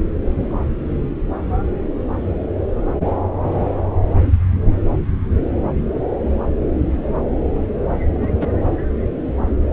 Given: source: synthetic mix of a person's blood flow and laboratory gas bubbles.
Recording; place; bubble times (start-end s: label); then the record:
Doppler ultrasound of blood flow; subclavian vein
8.21-8.48 s: bubbles
From the record:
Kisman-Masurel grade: 112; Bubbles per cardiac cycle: 1 to 2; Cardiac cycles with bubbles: 1 to 10%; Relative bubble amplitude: moderate (0.250 to 0.450); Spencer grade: 1 (occasional bubble signal discernible with the cardiac motion signal, with majority of cardiac periods free of bubbles); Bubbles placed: anywhere in the cardiac cycle